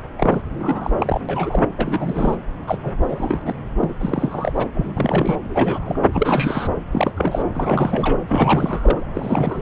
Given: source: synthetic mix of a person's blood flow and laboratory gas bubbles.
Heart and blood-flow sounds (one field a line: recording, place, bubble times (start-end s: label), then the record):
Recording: Doppler ultrasound of blood flow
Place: subclavian vein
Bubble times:
0.18-0.42 s: bubbles
0.59-0.90 s: bubbles
0.99-1.21 s: bubbles
1.29-1.66 s: bubbles
1.77-2.36 s: bubbles
2.67-2.78 s: bubbles
2.83-2.94 s: bubbles
3.04-3.53 s: bubbles
3.78-3.94 s: bubbles
4.00-4.66 s: bubbles
4.74-4.94 s: bubbles
4.97-5.36 s: bubbles
5.44-6.00 s: bubbles
6.12-6.69 s: bubbles
6.92-7.12 s: bubbles
7.15-7.43 s: bubbles
7.53-8.18 s: bubbles
8.28-9.06 s: bubbles
9.14-9.62 s: bubbles
From the record:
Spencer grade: 3 (all of the cardiac periods contain showers or single bubble signals, but not dominating or overriding the cardiac motion signals)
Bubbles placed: anywhere in the cardiac cycle